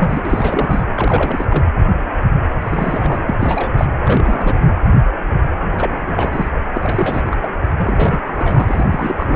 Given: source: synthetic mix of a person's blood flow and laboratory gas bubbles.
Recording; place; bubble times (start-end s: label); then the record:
Doppler ultrasound of blood flow; precordium
0.00-0.23 s: bubbles
0.25-0.83 s: bubbles
0.95-1.47 s: bubbles
1.50-1.65 s: bubbles
2.61-3.19 s: bubbles
3.27-3.36 s: bubbles
3.40-3.71 s: bubbles
3.75-3.86 s: bubbles
4.03-4.59 s: bubbles
5.72-6.49 s: bubbles
6.73-7.22 s: bubbles
7.25-7.37 s: bubbles
7.42-7.50 s: bubbles
7.78-8.19 s: bubbles
8.27-8.88 s: bubbles
8.90-9.36 s: bubbles
From the record:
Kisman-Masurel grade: 332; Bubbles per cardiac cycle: rolling drumbeat, 9 or more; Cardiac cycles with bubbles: 50 to 99%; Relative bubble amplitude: moderate (0.250 to 0.450); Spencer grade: 3 (all of the cardiac periods contain showers or single bubble signals, but not dominating or overriding the cardiac motion signals); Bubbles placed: anywhere in the cardiac cycle